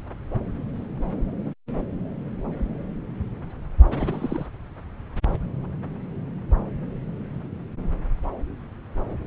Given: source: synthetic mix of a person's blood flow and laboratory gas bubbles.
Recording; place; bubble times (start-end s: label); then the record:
Doppler ultrasound of blood flow; subclavian vein
3.88-4.46 s: bubbles
From the record:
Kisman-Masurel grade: 211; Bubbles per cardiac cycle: several, 3 to 8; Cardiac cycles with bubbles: 1 to 10%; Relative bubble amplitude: barely perceptible (0.100 to 0.250); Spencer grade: 1 (occasional bubble signal discernible with the cardiac motion signal, with majority of cardiac periods free of bubbles); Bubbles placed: anywhere in the cardiac cycle